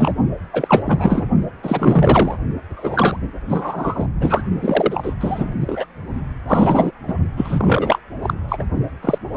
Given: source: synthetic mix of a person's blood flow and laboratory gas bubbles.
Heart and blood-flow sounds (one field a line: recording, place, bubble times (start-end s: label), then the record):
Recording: Doppler ultrasound of blood flow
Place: precordium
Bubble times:
0.00-0.12 s: bubbles
0.53-1.26 s: bubbles
1.62-2.38 s: bubbles
2.76-3.17 s: bubbles
3.48-4.07 s: bubbles
4.20-4.42 s: bubbles
4.62-5.13 s: bubbles
5.20-5.54 s: bubbles
5.61-5.86 s: bubbles
6.47-6.91 s: bubbles
7.07-7.15 s: bubbles
7.37-7.98 s: bubbles
8.22-8.34 s: bubbles
8.48-8.64 s: bubbles
9.02-9.19 s: bubbles
9.33-9.37 s: bubbles
From the record:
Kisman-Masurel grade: 343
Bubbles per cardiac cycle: rolling drumbeat, 9 or more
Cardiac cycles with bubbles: 100%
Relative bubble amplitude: loud (0.450 to 0.775)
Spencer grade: 3 (all of the cardiac periods contain showers or single bubble signals, but not dominating or overriding the cardiac motion signals)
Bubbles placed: only in the low amplitude regions of the cardiac cycle